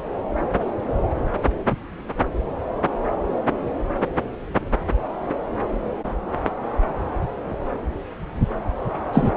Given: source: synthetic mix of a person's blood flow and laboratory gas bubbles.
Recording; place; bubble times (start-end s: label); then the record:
Doppler ultrasound of blood flow; subclavian vein
9.12-9.31 s: bubbles
From the record:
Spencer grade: 1 (occasional bubble signal discernible with the cardiac motion signal, with majority of cardiac periods free of bubbles); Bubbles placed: anywhere in the cardiac cycle